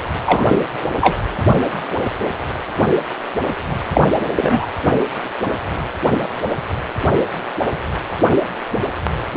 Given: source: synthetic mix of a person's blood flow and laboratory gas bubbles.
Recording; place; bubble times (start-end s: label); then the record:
Doppler ultrasound of blood flow; precordium
0.26-0.59 s: bubbles
1.00-1.16 s: bubbles
3.93-4.01 s: bubbles
4.36-4.67 s: bubbles
From the record:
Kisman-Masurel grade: 223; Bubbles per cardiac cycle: several, 3 to 8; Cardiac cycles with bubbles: 10 to 50%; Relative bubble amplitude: loud (0.450 to 0.775); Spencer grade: 2 (many but less than half of the cardiac periods contain bubble signals, singularly or in groups); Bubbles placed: anywhere in the cardiac cycle